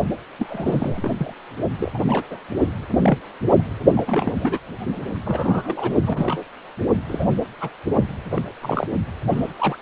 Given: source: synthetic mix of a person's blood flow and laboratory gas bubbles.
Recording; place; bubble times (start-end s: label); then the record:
Doppler ultrasound of blood flow; precordium
0.39-1.11 s: bubbles
1.17-1.33 s: bubbles
1.79-1.92 s: bubbles
1.94-2.03 s: bubbles
2.07-2.23 s: bubbles
2.30-2.38 s: bubbles
2.92-3.18 s: bubbles
3.55-3.64 s: bubbles
3.95-4.32 s: bubbles
4.39-4.60 s: bubbles
5.25-5.91 s: bubbles
6.07-6.44 s: bubbles
7.08-7.28 s: bubbles
7.61-7.70 s: bubbles
8.31-8.43 s: bubbles
8.62-8.88 s: bubbles
9.28-9.53 s: bubbles
9.59-9.78 s: bubbles
From the record:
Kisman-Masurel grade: 242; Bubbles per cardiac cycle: several, 3 to 8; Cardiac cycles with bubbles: 100%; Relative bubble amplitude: moderate (0.250 to 0.450); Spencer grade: 3 (all of the cardiac periods contain showers or single bubble signals, but not dominating or overriding the cardiac motion signals); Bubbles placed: only in the low amplitude regions of the cardiac cycle